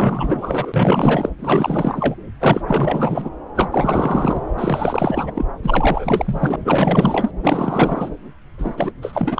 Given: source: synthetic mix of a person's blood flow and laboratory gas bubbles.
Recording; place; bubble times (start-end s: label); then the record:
Doppler ultrasound of blood flow; subclavian vein
0.00-1.29 s: bubbles
1.39-2.16 s: bubbles
2.40-2.62 s: bubbles
2.68-3.31 s: bubbles
3.55-4.39 s: bubbles
4.57-5.46 s: bubbles
5.62-6.56 s: bubbles
6.60-7.31 s: bubbles
7.42-8.10 s: bubbles
8.58-8.92 s: bubbles
9.02-9.40 s: bubbles
From the record:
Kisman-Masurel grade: 444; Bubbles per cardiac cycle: continuous sound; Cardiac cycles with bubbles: 100%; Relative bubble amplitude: maximal (0.775 to 0.999); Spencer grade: 4 (maximum detectable bubble signal sounding continuously throughout systole and diastole of every cardiac period, and overriding the amplitude of the normal cardiac signals); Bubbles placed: anywhere in the cardiac cycle